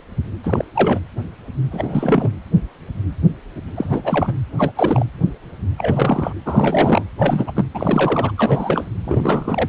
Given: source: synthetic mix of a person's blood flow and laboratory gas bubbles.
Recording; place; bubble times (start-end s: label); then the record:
Doppler ultrasound of blood flow; precordium
0.43-0.65 s: bubbles
0.74-0.99 s: bubbles
1.71-2.31 s: bubbles
3.75-4.33 s: bubbles
4.58-4.71 s: bubbles
4.75-5.06 s: bubbles
5.77-6.33 s: bubbles
6.46-7.04 s: bubbles
7.18-7.52 s: bubbles
7.56-7.65 s: bubbles
7.74-8.32 s: bubbles
8.38-8.89 s: bubbles
9.04-9.68 s: bubbles
From the record:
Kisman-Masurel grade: 332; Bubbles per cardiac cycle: rolling drumbeat, 9 or more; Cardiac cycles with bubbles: 50 to 99%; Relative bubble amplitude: moderate (0.250 to 0.450); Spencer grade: 3 (all of the cardiac periods contain showers or single bubble signals, but not dominating or overriding the cardiac motion signals); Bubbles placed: anywhere in the cardiac cycle